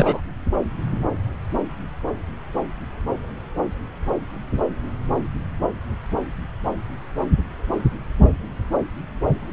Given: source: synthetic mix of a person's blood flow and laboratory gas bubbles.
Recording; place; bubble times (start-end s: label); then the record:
Doppler ultrasound of blood flow; subclavian vein
0.00-0.21 s: bubbles
From the record:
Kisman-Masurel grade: 212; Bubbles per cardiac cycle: several, 3 to 8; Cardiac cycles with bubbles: 1 to 10%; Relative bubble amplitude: moderate (0.250 to 0.450); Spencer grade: 1 (occasional bubble signal discernible with the cardiac motion signal, with majority of cardiac periods free of bubbles); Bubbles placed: anywhere in the cardiac cycle